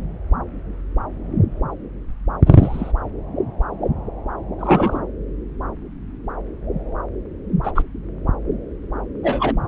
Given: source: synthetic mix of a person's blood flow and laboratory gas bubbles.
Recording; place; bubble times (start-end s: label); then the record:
Doppler ultrasound of blood flow; subclavian vein
2.46-2.92 s: bubbles
4.58-4.98 s: bubbles
7.63-7.71 s: bubbles
7.75-7.82 s: bubbles
9.23-9.54 s: bubbles
From the record:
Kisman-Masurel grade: 123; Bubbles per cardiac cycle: 1 to 2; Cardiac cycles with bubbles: 10 to 50%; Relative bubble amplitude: loud (0.450 to 0.775); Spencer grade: 2 (many but less than half of the cardiac periods contain bubble signals, singularly or in groups); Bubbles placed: anywhere in the cardiac cycle